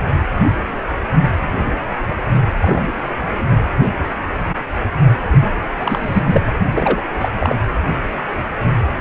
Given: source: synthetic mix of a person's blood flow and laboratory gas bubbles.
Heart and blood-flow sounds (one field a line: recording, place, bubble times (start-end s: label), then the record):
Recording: Doppler ultrasound of blood flow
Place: precordium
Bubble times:
2.62-2.83 s: bubbles
2.87-2.93 s: bubbles
5.31-5.54 s: bubbles
5.78-6.41 s: bubbles
6.74-7.01 s: bubbles
7.21-7.29 s: bubbles
7.38-7.55 s: bubbles
From the record:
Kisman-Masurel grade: 222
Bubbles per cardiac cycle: several, 3 to 8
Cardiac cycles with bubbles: 10 to 50%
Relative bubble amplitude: moderate (0.250 to 0.450)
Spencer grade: 2 (many but less than half of the cardiac periods contain bubble signals, singularly or in groups)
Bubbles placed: anywhere in the cardiac cycle